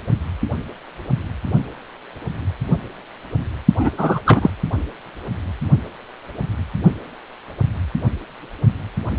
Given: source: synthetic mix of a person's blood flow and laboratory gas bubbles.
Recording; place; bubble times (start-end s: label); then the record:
Doppler ultrasound of blood flow; precordium
3.79-3.90 s: bubbles
3.97-4.19 s: bubbles
4.25-4.50 s: bubbles
From the record:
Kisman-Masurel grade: 213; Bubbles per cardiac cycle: several, 3 to 8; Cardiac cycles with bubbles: 1 to 10%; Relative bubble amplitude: loud (0.450 to 0.775); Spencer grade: 1 (occasional bubble signal discernible with the cardiac motion signal, with majority of cardiac periods free of bubbles); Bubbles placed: only in the low amplitude regions of the cardiac cycle